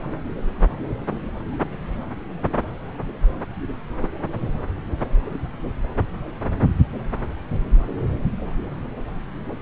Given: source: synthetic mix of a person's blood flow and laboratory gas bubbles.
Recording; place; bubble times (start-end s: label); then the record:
Doppler ultrasound of blood flow; subclavian vein
4.04-4.06 s: bubbles
From the record:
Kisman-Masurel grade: 111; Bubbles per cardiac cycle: 1 to 2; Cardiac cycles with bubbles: 1 to 10%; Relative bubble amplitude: barely perceptible (0.100 to 0.250); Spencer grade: 1 (occasional bubble signal discernible with the cardiac motion signal, with majority of cardiac periods free of bubbles); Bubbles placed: anywhere in the cardiac cycle